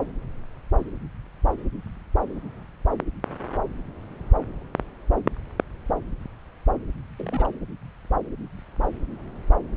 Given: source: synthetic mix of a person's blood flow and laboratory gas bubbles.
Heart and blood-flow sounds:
Doppler ultrasound of blood flow; subclavian vein
7.17-7.47 s: bubbles
From the record:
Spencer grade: 1 (occasional bubble signal discernible with the cardiac motion signal, with majority of cardiac periods free of bubbles); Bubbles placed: anywhere in the cardiac cycle

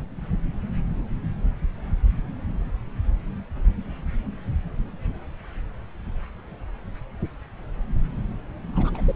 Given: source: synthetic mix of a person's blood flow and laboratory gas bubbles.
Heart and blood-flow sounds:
Doppler ultrasound of blood flow; subclavian vein
8.72-9.15 s: bubbles
From the record:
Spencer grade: 2 (many but less than half of the cardiac periods contain bubble signals, singularly or in groups); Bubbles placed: anywhere in the cardiac cycle

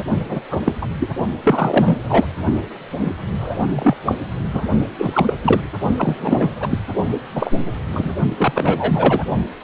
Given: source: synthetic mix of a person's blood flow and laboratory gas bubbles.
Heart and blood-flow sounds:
Doppler ultrasound of blood flow; precordium
0.00-0.02 s: bubbles
0.24-0.42 s: bubbles
0.51-0.60 s: bubbles
0.65-0.73 s: bubbles
0.81-0.87 s: bubbles
0.99-1.09 s: bubbles
1.43-1.98 s: bubbles
2.08-2.27 s: bubbles
2.98-3.11 s: bubbles
3.40-3.66 s: bubbles
3.69-3.97 s: bubbles
4.05-4.15 s: bubbles
4.53-4.63 s: bubbles
4.98-5.34 s: bubbles
5.44-5.61 s: bubbles
5.97-6.49 s: bubbles
6.60-6.79 s: bubbles
7.35-7.54 s: bubbles
7.92-8.16 s: bubbles
8.37-9.24 s: bubbles
From the record:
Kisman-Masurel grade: 243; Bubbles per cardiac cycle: several, 3 to 8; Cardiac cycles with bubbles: 100%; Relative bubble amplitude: loud (0.450 to 0.775); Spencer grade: 3 (all of the cardiac periods contain showers or single bubble signals, but not dominating or overriding the cardiac motion signals); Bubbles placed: only in the low amplitude regions of the cardiac cycle

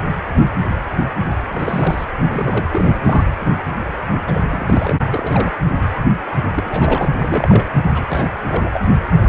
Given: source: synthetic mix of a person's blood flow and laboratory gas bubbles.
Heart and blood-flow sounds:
Doppler ultrasound of blood flow; precordium
1.50-2.05 s: bubbles
2.16-2.66 s: bubbles
2.71-3.24 s: bubbles
4.25-4.40 s: bubbles
4.46-4.99 s: bubbles
5.08-5.52 s: bubbles
6.55-7.09 s: bubbles
7.19-7.68 s: bubbles
7.93-8.04 s: bubbles
8.09-8.31 s: bubbles
8.47-8.71 s: bubbles
8.73-8.80 s: bubbles
From the record:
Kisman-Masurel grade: 332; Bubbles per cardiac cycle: rolling drumbeat, 9 or more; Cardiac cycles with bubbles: 50 to 99%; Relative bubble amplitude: moderate (0.250 to 0.450); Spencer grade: 3 (all of the cardiac periods contain showers or single bubble signals, but not dominating or overriding the cardiac motion signals); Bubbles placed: anywhere in the cardiac cycle

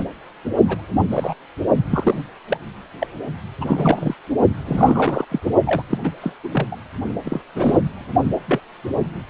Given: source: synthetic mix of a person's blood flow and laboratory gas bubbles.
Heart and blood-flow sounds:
Doppler ultrasound of blood flow; precordium
0.00-0.04 s: bubbles
0.45-0.49 s: bubbles
0.68-0.81 s: bubbles
1.11-1.34 s: bubbles
1.90-2.21 s: bubbles
2.48-2.58 s: bubbles
2.98-3.07 s: bubbles
3.60-4.15 s: bubbles
4.65-5.25 s: bubbles
5.31-5.40 s: bubbles
5.66-5.83 s: bubbles
5.90-5.98 s: bubbles
6.03-6.12 s: bubbles
6.21-6.32 s: bubbles
6.43-6.50 s: bubbles
6.52-6.67 s: bubbles
6.71-6.76 s: bubbles
7.24-7.40 s: bubbles
7.54-7.79 s: bubbles
8.47-8.60 s: bubbles
From the record:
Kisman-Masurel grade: 242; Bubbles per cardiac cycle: several, 3 to 8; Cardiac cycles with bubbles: 100%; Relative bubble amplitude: moderate (0.250 to 0.450); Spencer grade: 3 (all of the cardiac periods contain showers or single bubble signals, but not dominating or overriding the cardiac motion signals); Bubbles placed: only in the low amplitude regions of the cardiac cycle

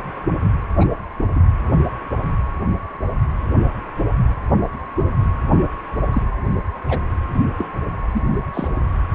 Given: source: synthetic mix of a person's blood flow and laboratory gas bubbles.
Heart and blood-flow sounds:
Doppler ultrasound of blood flow; precordium
0.80-0.85 s: bubbles
1.34-1.40 s: bubbles
6.11-6.21 s: bubbles
6.88-6.97 s: bubbles
7.58-7.68 s: bubbles
8.14-8.21 s: bubbles
8.53-8.68 s: bubbles
From the record:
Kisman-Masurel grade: 122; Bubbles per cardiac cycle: 1 to 2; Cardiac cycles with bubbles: 10 to 50%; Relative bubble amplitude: moderate (0.250 to 0.450); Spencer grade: 2 (many but less than half of the cardiac periods contain bubble signals, singularly or in groups); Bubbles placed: anywhere in the cardiac cycle

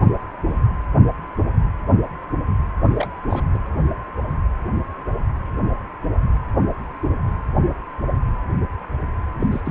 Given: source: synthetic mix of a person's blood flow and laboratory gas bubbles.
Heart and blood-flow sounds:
Doppler ultrasound of blood flow; precordium
2.83-3.07 s: bubbles
3.29-3.43 s: bubbles
3.53-3.58 s: bubbles
9.39-9.47 s: bubbles
9.51-9.61 s: bubbles
9.65-9.71 s: bubbles
From the record:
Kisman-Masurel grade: 222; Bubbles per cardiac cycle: several, 3 to 8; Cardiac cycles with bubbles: 10 to 50%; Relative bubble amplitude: moderate (0.250 to 0.450); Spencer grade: 2 (many but less than half of the cardiac periods contain bubble signals, singularly or in groups); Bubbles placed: anywhere in the cardiac cycle

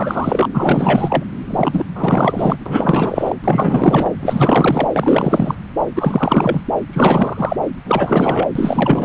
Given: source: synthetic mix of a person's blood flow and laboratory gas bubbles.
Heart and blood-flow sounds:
Doppler ultrasound of blood flow; subclavian vein
0.00-0.49 s: bubbles
0.53-1.24 s: bubbles
1.50-1.85 s: bubbles
1.95-2.56 s: bubbles
2.66-3.35 s: bubbles
3.44-4.11 s: bubbles
4.20-5.55 s: bubbles
5.96-6.62 s: bubbles
6.93-7.57 s: bubbles
7.86-8.47 s: bubbles
8.55-9.05 s: bubbles
From the record:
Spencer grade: 4 (maximum detectable bubble signal sounding continuously throughout systole and diastole of every cardiac period, and overriding the amplitude of the normal cardiac signals); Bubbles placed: anywhere in the cardiac cycle

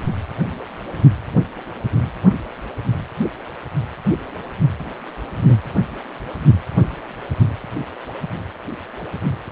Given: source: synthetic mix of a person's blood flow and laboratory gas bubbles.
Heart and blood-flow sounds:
Doppler ultrasound of blood flow; precordium
5.46-5.56 s: bubbles
From the record:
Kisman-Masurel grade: 112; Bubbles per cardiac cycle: 1 to 2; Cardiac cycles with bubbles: 1 to 10%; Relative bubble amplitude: moderate (0.250 to 0.450); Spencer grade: 1 (occasional bubble signal discernible with the cardiac motion signal, with majority of cardiac periods free of bubbles); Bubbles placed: anywhere in the cardiac cycle

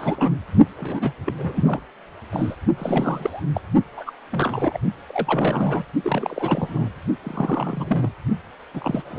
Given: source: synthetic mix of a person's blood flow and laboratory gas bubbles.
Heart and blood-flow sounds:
Doppler ultrasound of blood flow; precordium
0.00-0.37 s: bubbles
0.78-1.12 s: bubbles
1.26-1.33 s: bubbles
1.38-1.80 s: bubbles
2.31-2.55 s: bubbles
2.77-3.42 s: bubbles
3.53-3.61 s: bubbles
3.97-4.12 s: bubbles
4.32-4.78 s: bubbles
5.07-5.85 s: bubbles
6.04-6.90 s: bubbles
7.23-8.11 s: bubbles
8.73-9.19 s: bubbles
From the record:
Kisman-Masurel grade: 342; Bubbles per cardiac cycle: rolling drumbeat, 9 or more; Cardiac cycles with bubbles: 100%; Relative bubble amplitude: moderate (0.250 to 0.450); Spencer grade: 3 (all of the cardiac periods contain showers or single bubble signals, but not dominating or overriding the cardiac motion signals); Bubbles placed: only in the low amplitude regions of the cardiac cycle

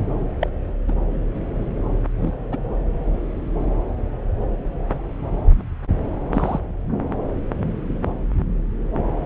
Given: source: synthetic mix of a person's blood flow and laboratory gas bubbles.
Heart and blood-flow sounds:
Doppler ultrasound of blood flow; subclavian vein
0.41-0.49 s: bubbles
0.88-0.95 s: bubbles
2.18-2.33 s: bubbles
2.52-2.57 s: bubbles
6.32-6.59 s: bubbles
From the record:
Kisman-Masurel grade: 122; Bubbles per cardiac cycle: 1 to 2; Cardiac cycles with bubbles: 10 to 50%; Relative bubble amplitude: moderate (0.250 to 0.450); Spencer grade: 2 (many but less than half of the cardiac periods contain bubble signals, singularly or in groups); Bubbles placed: anywhere in the cardiac cycle

